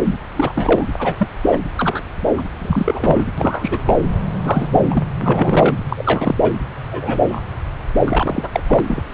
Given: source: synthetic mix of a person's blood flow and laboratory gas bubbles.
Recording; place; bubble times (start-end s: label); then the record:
Doppler ultrasound of blood flow; subclavian vein
0.04-0.17 s: bubbles
0.35-0.53 s: bubbles
0.55-0.85 s: bubbles
0.98-1.15 s: bubbles
1.18-1.29 s: bubbles
1.51-1.58 s: bubbles
1.76-2.00 s: bubbles
2.37-2.42 s: bubbles
2.58-3.24 s: bubbles
3.38-3.79 s: bubbles
3.85-3.99 s: bubbles
4.42-4.69 s: bubbles
4.72-4.86 s: bubbles
4.90-5.04 s: bubbles
5.20-5.74 s: bubbles
5.89-6.53 s: bubbles
6.91-7.19 s: bubbles
7.29-7.40 s: bubbles
8.07-8.49 s: bubbles
8.52-8.60 s: bubbles
8.68-8.80 s: bubbles
8.87-9.02 s: bubbles
From the record:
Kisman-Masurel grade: 243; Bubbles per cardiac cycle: several, 3 to 8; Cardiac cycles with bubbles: 100%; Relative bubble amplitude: loud (0.450 to 0.775); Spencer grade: 3 (all of the cardiac periods contain showers or single bubble signals, but not dominating or overriding the cardiac motion signals); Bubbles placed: anywhere in the cardiac cycle